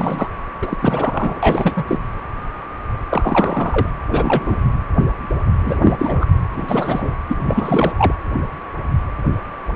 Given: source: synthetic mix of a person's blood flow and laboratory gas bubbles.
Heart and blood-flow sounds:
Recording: Doppler ultrasound of blood flow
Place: precordium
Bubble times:
0.00-0.31 s: bubbles
0.62-0.77 s: bubbles
0.82-1.73 s: bubbles
1.76-1.84 s: bubbles
1.87-1.99 s: bubbles
3.09-3.89 s: bubbles
4.11-4.57 s: bubbles
5.62-6.27 s: bubbles
6.57-7.15 s: bubbles
7.28-7.37 s: bubbles
7.46-7.92 s: bubbles
7.98-8.13 s: bubbles
From the record:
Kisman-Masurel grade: 332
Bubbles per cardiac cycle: rolling drumbeat, 9 or more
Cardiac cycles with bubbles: 50 to 99%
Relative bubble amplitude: moderate (0.250 to 0.450)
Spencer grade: 3 (all of the cardiac periods contain showers or single bubble signals, but not dominating or overriding the cardiac motion signals)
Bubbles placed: anywhere in the cardiac cycle

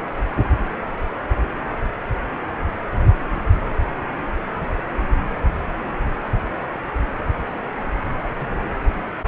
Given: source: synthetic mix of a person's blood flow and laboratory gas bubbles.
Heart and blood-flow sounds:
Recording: Doppler ultrasound of blood flow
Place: precordium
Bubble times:
no bubbles
From the record:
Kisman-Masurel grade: 000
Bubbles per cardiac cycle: 0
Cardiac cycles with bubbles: 0%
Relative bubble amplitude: no bubbles discernible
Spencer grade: 0 (complete lack of bubble signals)

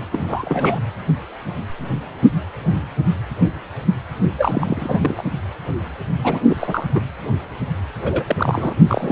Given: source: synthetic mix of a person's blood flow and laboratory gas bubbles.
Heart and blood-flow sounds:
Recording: Doppler ultrasound of blood flow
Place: precordium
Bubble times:
0.12-0.79 s: bubbles
4.38-5.24 s: bubbles
6.23-6.40 s: bubbles
6.49-6.57 s: bubbles
6.59-6.88 s: bubbles
6.95-7.01 s: bubbles
8.05-8.24 s: bubbles
8.28-8.73 s: bubbles
8.87-9.12 s: bubbles
From the record:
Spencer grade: 3 (all of the cardiac periods contain showers or single bubble signals, but not dominating or overriding the cardiac motion signals)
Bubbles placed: anywhere in the cardiac cycle

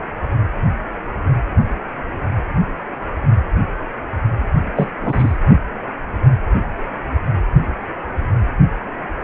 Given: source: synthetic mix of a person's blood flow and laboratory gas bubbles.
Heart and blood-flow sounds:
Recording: Doppler ultrasound of blood flow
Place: precordium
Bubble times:
4.76-4.91 s: bubbles
5.02-5.37 s: bubbles
From the record:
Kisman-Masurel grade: 213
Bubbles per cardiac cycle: several, 3 to 8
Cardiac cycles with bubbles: 1 to 10%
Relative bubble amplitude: loud (0.450 to 0.775)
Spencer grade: 1 (occasional bubble signal discernible with the cardiac motion signal, with majority of cardiac periods free of bubbles)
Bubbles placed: only in the low amplitude regions of the cardiac cycle

